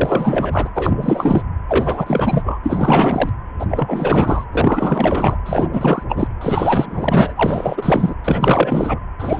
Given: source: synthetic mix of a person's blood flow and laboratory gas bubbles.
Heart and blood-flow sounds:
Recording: Doppler ultrasound of blood flow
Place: precordium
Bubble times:
0.00-0.69 s: bubbles
0.74-1.42 s: bubbles
1.68-2.59 s: bubbles
2.62-3.32 s: bubbles
3.59-3.66 s: bubbles
3.68-4.46 s: bubbles
4.52-5.37 s: bubbles
5.46-5.69 s: bubbles
5.72-6.04 s: bubbles
6.09-6.27 s: bubbles
6.41-8.15 s: bubbles
8.24-9.00 s: bubbles
9.19-9.40 s: bubbles
From the record:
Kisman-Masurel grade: 444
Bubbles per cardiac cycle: continuous sound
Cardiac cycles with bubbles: 100%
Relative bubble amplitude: maximal (0.775 to 0.999)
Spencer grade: 4 (maximum detectable bubble signal sounding continuously throughout systole and diastole of every cardiac period, and overriding the amplitude of the normal cardiac signals)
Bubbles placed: anywhere in the cardiac cycle

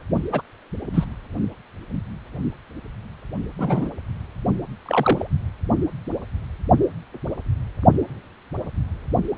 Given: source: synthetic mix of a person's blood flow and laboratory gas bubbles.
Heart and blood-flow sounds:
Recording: Doppler ultrasound of blood flow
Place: precordium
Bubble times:
0.32-0.41 s: bubbles
0.94-1.05 s: bubbles
3.58-3.89 s: bubbles
4.85-5.29 s: bubbles
From the record:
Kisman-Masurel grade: 122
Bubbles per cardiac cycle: 1 to 2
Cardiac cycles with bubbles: 10 to 50%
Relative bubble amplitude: moderate (0.250 to 0.450)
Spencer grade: 2 (many but less than half of the cardiac periods contain bubble signals, singularly or in groups)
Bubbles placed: only in the low amplitude regions of the cardiac cycle

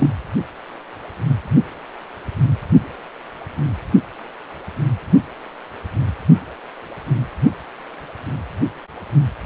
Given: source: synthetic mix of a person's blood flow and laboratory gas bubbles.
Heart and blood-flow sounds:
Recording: Doppler ultrasound of blood flow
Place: precordium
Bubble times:
0.00-0.10 s: bubbles
From the record:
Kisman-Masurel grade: 113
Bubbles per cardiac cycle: 1 to 2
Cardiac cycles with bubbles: 1 to 10%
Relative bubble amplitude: loud (0.450 to 0.775)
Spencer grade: 1 (occasional bubble signal discernible with the cardiac motion signal, with majority of cardiac periods free of bubbles)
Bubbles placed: only in the low amplitude regions of the cardiac cycle

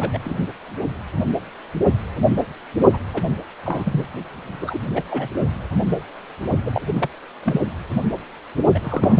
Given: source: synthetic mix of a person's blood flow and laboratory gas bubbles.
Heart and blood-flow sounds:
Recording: Doppler ultrasound of blood flow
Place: precordium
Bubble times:
0.00-0.18 s: bubbles
0.24-0.36 s: bubbles
2.93-2.99 s: bubbles
3.14-3.23 s: bubbles
3.65-4.05 s: bubbles
4.61-4.79 s: bubbles
4.94-5.03 s: bubbles
5.10-5.28 s: bubbles
6.65-6.71 s: bubbles
6.74-6.82 s: bubbles
6.86-7.09 s: bubbles
7.42-7.61 s: bubbles
8.74-8.79 s: bubbles
8.83-9.20 s: bubbles
From the record:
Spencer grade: 3 (all of the cardiac periods contain showers or single bubble signals, but not dominating or overriding the cardiac motion signals)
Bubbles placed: only in the low amplitude regions of the cardiac cycle

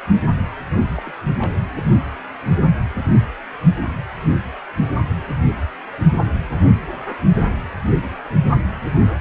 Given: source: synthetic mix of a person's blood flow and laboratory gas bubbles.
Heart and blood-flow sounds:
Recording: Doppler ultrasound of blood flow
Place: precordium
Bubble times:
0.95-1.15 s: bubbles
1.38-1.59 s: bubbles
From the record:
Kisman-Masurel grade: 211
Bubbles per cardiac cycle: several, 3 to 8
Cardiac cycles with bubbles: 1 to 10%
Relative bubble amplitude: barely perceptible (0.100 to 0.250)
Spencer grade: 1 (occasional bubble signal discernible with the cardiac motion signal, with majority of cardiac periods free of bubbles)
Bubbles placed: anywhere in the cardiac cycle

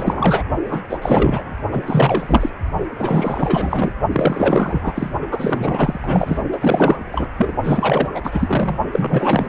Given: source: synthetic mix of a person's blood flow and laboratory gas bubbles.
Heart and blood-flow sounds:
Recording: Doppler ultrasound of blood flow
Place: precordium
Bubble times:
0.00-0.42 s: bubbles
0.65-0.81 s: bubbles
0.89-0.99 s: bubbles
1.01-1.56 s: bubbles
1.71-1.83 s: bubbles
1.86-2.50 s: bubbles
2.95-3.92 s: bubbles
4.12-5.11 s: bubbles
5.30-6.40 s: bubbles
6.52-7.29 s: bubbles
7.37-7.54 s: bubbles
7.62-8.09 s: bubbles
8.14-8.78 s: bubbles
8.92-9.49 s: bubbles
From the record:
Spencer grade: 4 (maximum detectable bubble signal sounding continuously throughout systole and diastole of every cardiac period, and overriding the amplitude of the normal cardiac signals)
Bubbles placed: only in the low amplitude regions of the cardiac cycle

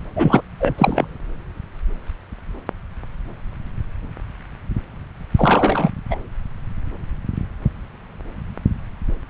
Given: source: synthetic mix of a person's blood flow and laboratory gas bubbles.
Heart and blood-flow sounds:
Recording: Doppler ultrasound of blood flow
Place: subclavian vein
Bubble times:
0.15-0.41 s: bubbles
0.60-0.73 s: bubbles
0.78-1.05 s: bubbles
5.37-5.91 s: bubbles
6.10-6.20 s: bubbles
From the record:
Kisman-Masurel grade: 223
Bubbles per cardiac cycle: several, 3 to 8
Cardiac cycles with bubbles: 10 to 50%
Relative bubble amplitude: loud (0.450 to 0.775)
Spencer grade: 2 (many but less than half of the cardiac periods contain bubble signals, singularly or in groups)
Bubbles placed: anywhere in the cardiac cycle

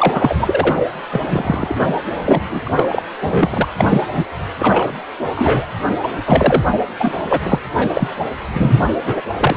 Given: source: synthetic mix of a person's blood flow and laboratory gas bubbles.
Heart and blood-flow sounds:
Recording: Doppler ultrasound of blood flow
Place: precordium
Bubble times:
0.00-0.74 s: bubbles
1.12-1.20 s: bubbles
1.27-1.77 s: bubbles
2.19-2.61 s: bubbles
2.65-3.02 s: bubbles
3.21-3.68 s: bubbles
3.78-4.02 s: bubbles
4.13-4.22 s: bubbles
4.59-4.93 s: bubbles
5.35-5.67 s: bubbles
5.88-5.92 s: bubbles
6.03-6.08 s: bubbles
6.26-6.63 s: bubbles
7.00-7.14 s: bubbles
7.29-7.41 s: bubbles
7.43-7.59 s: bubbles
7.77-7.87 s: bubbles
7.93-8.08 s: bubbles
8.53-8.87 s: bubbles
9.06-9.21 s: bubbles
9.40-9.57 s: bubbles
From the record:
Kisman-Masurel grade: 243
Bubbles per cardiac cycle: several, 3 to 8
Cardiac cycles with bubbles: 100%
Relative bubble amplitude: loud (0.450 to 0.775)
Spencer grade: 3 (all of the cardiac periods contain showers or single bubble signals, but not dominating or overriding the cardiac motion signals)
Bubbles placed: anywhere in the cardiac cycle

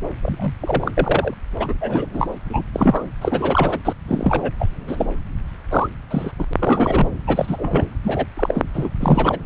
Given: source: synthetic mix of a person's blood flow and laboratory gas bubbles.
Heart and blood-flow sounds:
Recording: Doppler ultrasound of blood flow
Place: subclavian vein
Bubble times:
0.22-0.53 s: bubbles
0.60-0.92 s: bubbles
0.97-1.34 s: bubbles
1.60-1.75 s: bubbles
1.81-2.06 s: bubbles
2.14-2.27 s: bubbles
2.50-2.64 s: bubbles
2.73-3.04 s: bubbles
3.21-3.79 s: bubbles
3.84-3.93 s: bubbles
4.08-4.51 s: bubbles
4.59-4.67 s: bubbles
4.88-5.07 s: bubbles
5.71-5.88 s: bubbles
6.10-6.31 s: bubbles
6.38-6.45 s: bubbles
6.59-7.11 s: bubbles
7.26-7.86 s: bubbles
8.04-8.26 s: bubbles
8.37-8.62 s: bubbles
8.74-8.89 s: bubbles
9.00-9.38 s: bubbles
From the record:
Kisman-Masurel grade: 242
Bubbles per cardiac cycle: several, 3 to 8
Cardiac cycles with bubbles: 100%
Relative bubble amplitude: moderate (0.250 to 0.450)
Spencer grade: 3 (all of the cardiac periods contain showers or single bubble signals, but not dominating or overriding the cardiac motion signals)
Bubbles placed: anywhere in the cardiac cycle

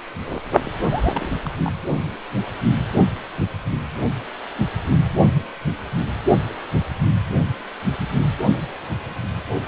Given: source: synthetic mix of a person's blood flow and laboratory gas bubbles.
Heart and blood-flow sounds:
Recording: Doppler ultrasound of blood flow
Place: precordium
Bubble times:
0.76-1.30 s: bubbles
1.45-1.50 s: bubbles
1.62-1.72 s: bubbles
From the record:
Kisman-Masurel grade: 211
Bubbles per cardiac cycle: several, 3 to 8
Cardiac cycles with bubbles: 1 to 10%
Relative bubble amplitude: barely perceptible (0.100 to 0.250)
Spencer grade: 1 (occasional bubble signal discernible with the cardiac motion signal, with majority of cardiac periods free of bubbles)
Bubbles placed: only in the low amplitude regions of the cardiac cycle

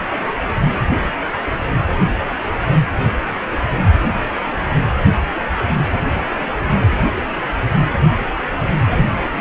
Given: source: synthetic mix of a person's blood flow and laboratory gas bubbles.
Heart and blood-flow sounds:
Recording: Doppler ultrasound of blood flow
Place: precordium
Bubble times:
8.98-9.07 s: bubbles
9.35-9.41 s: bubbles
From the record:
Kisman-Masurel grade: 112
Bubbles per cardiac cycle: 1 to 2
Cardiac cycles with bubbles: 1 to 10%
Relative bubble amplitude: moderate (0.250 to 0.450)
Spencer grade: 1 (occasional bubble signal discernible with the cardiac motion signal, with majority of cardiac periods free of bubbles)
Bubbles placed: anywhere in the cardiac cycle

